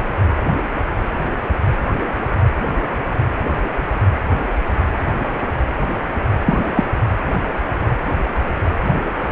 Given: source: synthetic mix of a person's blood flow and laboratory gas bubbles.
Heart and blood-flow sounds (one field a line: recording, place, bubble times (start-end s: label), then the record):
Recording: Doppler ultrasound of blood flow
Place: precordium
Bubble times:
6.46-6.72 s: bubbles
6.75-6.83 s: bubbles
From the record:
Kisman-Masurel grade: 213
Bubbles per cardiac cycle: several, 3 to 8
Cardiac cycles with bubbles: 1 to 10%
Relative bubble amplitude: loud (0.450 to 0.775)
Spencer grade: 1 (occasional bubble signal discernible with the cardiac motion signal, with majority of cardiac periods free of bubbles)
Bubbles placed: anywhere in the cardiac cycle